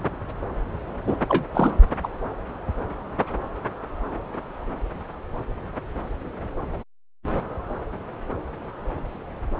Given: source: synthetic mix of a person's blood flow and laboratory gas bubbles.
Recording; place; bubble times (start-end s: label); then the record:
Doppler ultrasound of blood flow; subclavian vein
1.06-1.16 s: bubbles
1.27-1.45 s: bubbles
1.54-1.72 s: bubbles
2.03-2.08 s: bubbles
From the record:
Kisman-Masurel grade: 213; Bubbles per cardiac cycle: several, 3 to 8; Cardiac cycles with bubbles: 1 to 10%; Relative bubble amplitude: loud (0.450 to 0.775); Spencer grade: 1 (occasional bubble signal discernible with the cardiac motion signal, with majority of cardiac periods free of bubbles); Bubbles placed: anywhere in the cardiac cycle